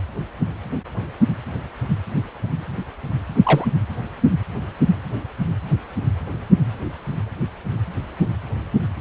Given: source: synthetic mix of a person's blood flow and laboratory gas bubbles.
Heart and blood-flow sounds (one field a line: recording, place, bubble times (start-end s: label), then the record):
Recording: Doppler ultrasound of blood flow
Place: precordium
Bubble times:
3.44-3.68 s: bubbles
From the record:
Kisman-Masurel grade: 112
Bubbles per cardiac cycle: 1 to 2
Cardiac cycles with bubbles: 1 to 10%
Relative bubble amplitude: moderate (0.250 to 0.450)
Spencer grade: 1 (occasional bubble signal discernible with the cardiac motion signal, with majority of cardiac periods free of bubbles)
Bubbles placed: anywhere in the cardiac cycle